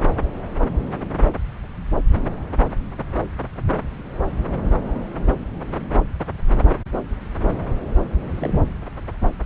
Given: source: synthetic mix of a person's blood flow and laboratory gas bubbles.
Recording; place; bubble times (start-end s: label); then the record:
Doppler ultrasound of blood flow; subclavian vein
8.39-8.61 s: bubbles
From the record:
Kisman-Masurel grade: 211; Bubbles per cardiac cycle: several, 3 to 8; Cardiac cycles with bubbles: 1 to 10%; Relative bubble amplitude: barely perceptible (0.100 to 0.250); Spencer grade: 1 (occasional bubble signal discernible with the cardiac motion signal, with majority of cardiac periods free of bubbles); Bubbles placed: anywhere in the cardiac cycle